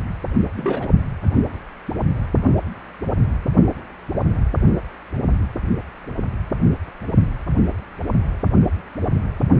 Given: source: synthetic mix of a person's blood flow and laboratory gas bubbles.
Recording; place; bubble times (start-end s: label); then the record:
Doppler ultrasound of blood flow; precordium
0.52-0.87 s: bubbles
From the record:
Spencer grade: 1 (occasional bubble signal discernible with the cardiac motion signal, with majority of cardiac periods free of bubbles); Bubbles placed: only in the low amplitude regions of the cardiac cycle